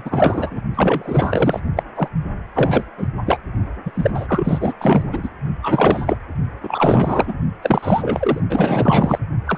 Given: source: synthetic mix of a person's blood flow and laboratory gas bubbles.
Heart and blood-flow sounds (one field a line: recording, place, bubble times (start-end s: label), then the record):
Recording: Doppler ultrasound of blood flow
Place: precordium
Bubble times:
0.00-0.61 s: bubbles
0.73-1.60 s: bubbles
1.76-1.83 s: bubbles
1.95-2.08 s: bubbles
2.54-2.83 s: bubbles
2.98-3.08 s: bubbles
3.26-3.40 s: bubbles
3.86-4.11 s: bubbles
4.15-4.74 s: bubbles
4.79-5.29 s: bubbles
5.62-6.17 s: bubbles
6.63-7.36 s: bubbles
7.62-8.40 s: bubbles
8.49-9.19 s: bubbles
9.46-9.58 s: bubbles
From the record:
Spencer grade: 4 (maximum detectable bubble signal sounding continuously throughout systole and diastole of every cardiac period, and overriding the amplitude of the normal cardiac signals)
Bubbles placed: only in the low amplitude regions of the cardiac cycle